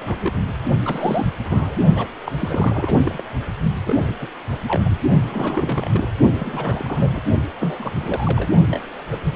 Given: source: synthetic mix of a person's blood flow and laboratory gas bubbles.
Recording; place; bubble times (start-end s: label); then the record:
Doppler ultrasound of blood flow; precordium
0.00-0.34 s: bubbles
0.85-1.27 s: bubbles
1.44-1.77 s: bubbles
1.95-2.08 s: bubbles
2.25-2.32 s: bubbles
2.41-2.98 s: bubbles
3.06-3.22 s: bubbles
3.84-3.96 s: bubbles
4.08-4.14 s: bubbles
4.21-4.29 s: bubbles
4.51-4.56 s: bubbles
4.68-4.83 s: bubbles
4.85-4.95 s: bubbles
5.28-6.11 s: bubbles
6.34-7.21 s: bubbles
7.58-7.91 s: bubbles
7.96-8.49 s: bubbles
8.70-8.79 s: bubbles
9.11-9.16 s: bubbles
9.25-9.33 s: bubbles
From the record:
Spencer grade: 3 (all of the cardiac periods contain showers or single bubble signals, but not dominating or overriding the cardiac motion signals); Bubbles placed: only in the low amplitude regions of the cardiac cycle